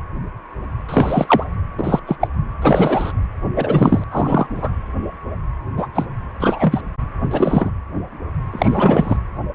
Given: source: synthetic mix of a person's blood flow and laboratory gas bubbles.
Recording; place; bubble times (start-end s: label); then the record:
Doppler ultrasound of blood flow; precordium
0.89-1.44 s: bubbles
1.78-2.00 s: bubbles
2.06-2.16 s: bubbles
2.21-2.27 s: bubbles
2.62-3.12 s: bubbles
3.56-4.04 s: bubbles
4.11-4.46 s: bubbles
4.54-4.71 s: bubbles
5.77-5.88 s: bubbles
5.94-6.05 s: bubbles
6.39-6.81 s: bubbles
7.31-7.70 s: bubbles
8.52-9.17 s: bubbles
From the record:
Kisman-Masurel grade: 233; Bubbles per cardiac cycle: several, 3 to 8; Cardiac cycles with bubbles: 50 to 99%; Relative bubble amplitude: loud (0.450 to 0.775); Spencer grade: 3 (all of the cardiac periods contain showers or single bubble signals, but not dominating or overriding the cardiac motion signals); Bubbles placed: anywhere in the cardiac cycle